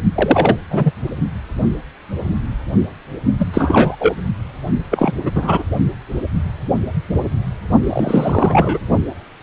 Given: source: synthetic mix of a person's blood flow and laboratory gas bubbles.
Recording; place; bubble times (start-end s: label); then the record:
Doppler ultrasound of blood flow; precordium
0.15-0.56 s: bubbles
0.69-0.91 s: bubbles
3.39-3.46 s: bubbles
3.53-3.96 s: bubbles
3.98-4.14 s: bubbles
4.91-5.12 s: bubbles
5.23-5.31 s: bubbles
5.35-5.63 s: bubbles
7.83-8.79 s: bubbles
From the record:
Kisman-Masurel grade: 233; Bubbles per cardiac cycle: several, 3 to 8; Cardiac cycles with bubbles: 50 to 99%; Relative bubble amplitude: loud (0.450 to 0.775); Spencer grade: 3 (all of the cardiac periods contain showers or single bubble signals, but not dominating or overriding the cardiac motion signals); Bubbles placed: only in the low amplitude regions of the cardiac cycle